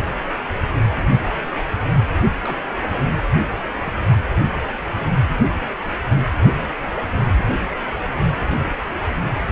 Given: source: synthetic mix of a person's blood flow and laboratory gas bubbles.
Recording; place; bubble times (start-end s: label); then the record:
Doppler ultrasound of blood flow; precordium
2.45-2.57 s: bubbles
2.91-3.04 s: bubbles
3.75-3.93 s: bubbles
From the record:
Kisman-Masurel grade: 211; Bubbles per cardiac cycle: several, 3 to 8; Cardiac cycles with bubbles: 1 to 10%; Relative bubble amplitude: barely perceptible (0.100 to 0.250); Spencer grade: 1 (occasional bubble signal discernible with the cardiac motion signal, with majority of cardiac periods free of bubbles); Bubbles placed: only in the low amplitude regions of the cardiac cycle